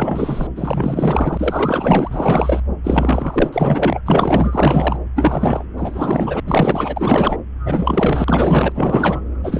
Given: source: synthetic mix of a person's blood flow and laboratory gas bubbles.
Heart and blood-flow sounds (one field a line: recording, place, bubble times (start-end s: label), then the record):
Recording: Doppler ultrasound of blood flow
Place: subclavian vein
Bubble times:
0.00-0.47 s: bubbles
0.55-2.60 s: bubbles
2.84-3.50 s: bubbles
3.53-3.99 s: bubbles
4.05-4.97 s: bubbles
5.15-5.65 s: bubbles
5.77-6.40 s: bubbles
6.45-7.37 s: bubbles
7.65-8.72 s: bubbles
8.75-9.21 s: bubbles
9.44-9.60 s: bubbles
From the record:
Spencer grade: 4 (maximum detectable bubble signal sounding continuously throughout systole and diastole of every cardiac period, and overriding the amplitude of the normal cardiac signals)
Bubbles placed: anywhere in the cardiac cycle